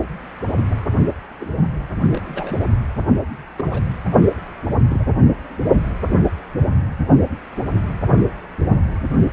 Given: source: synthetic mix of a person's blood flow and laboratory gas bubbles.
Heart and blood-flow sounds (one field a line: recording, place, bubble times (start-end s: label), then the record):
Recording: Doppler ultrasound of blood flow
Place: precordium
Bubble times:
0.00-0.04 s: bubbles
1.40-1.46 s: bubbles
2.13-2.62 s: bubbles
3.56-3.65 s: bubbles
3.72-3.81 s: bubbles
4.89-5.05 s: bubbles
8.07-8.23 s: bubbles
From the record:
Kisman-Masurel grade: 121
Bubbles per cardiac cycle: 1 to 2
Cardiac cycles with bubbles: 10 to 50%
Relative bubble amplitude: barely perceptible (0.100 to 0.250)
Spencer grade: 2 (many but less than half of the cardiac periods contain bubble signals, singularly or in groups)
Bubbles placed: anywhere in the cardiac cycle